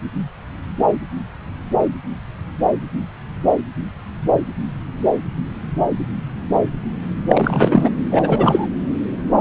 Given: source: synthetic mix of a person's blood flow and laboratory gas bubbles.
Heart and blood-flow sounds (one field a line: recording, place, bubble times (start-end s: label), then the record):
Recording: Doppler ultrasound of blood flow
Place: subclavian vein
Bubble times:
7.27-7.90 s: bubbles
8.11-8.67 s: bubbles
From the record:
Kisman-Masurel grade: 223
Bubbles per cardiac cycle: several, 3 to 8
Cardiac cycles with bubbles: 10 to 50%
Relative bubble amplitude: loud (0.450 to 0.775)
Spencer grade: 2 (many but less than half of the cardiac periods contain bubble signals, singularly or in groups)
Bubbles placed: anywhere in the cardiac cycle